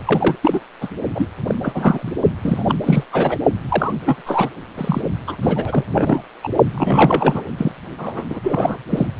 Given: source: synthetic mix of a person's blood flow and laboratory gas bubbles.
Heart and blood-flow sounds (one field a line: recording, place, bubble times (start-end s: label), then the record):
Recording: Doppler ultrasound of blood flow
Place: precordium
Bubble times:
0.05-0.35 s: bubbles
0.43-0.59 s: bubbles
0.80-0.89 s: bubbles
1.15-1.30 s: bubbles
1.47-1.55 s: bubbles
1.63-2.12 s: bubbles
2.43-2.75 s: bubbles
2.83-3.04 s: bubbles
3.12-3.37 s: bubbles
3.68-3.94 s: bubbles
4.05-4.22 s: bubbles
4.26-4.49 s: bubbles
4.77-5.02 s: bubbles
5.27-5.36 s: bubbles
5.42-5.84 s: bubbles
5.95-6.21 s: bubbles
6.43-6.49 s: bubbles
6.75-7.42 s: bubbles
7.58-7.71 s: bubbles
7.98-8.23 s: bubbles
8.29-8.39 s: bubbles
8.43-8.77 s: bubbles
8.89-9.06 s: bubbles
From the record:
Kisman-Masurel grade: 342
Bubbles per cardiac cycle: rolling drumbeat, 9 or more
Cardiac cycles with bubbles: 100%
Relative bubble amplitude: moderate (0.250 to 0.450)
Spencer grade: 3 (all of the cardiac periods contain showers or single bubble signals, but not dominating or overriding the cardiac motion signals)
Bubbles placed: only in the low amplitude regions of the cardiac cycle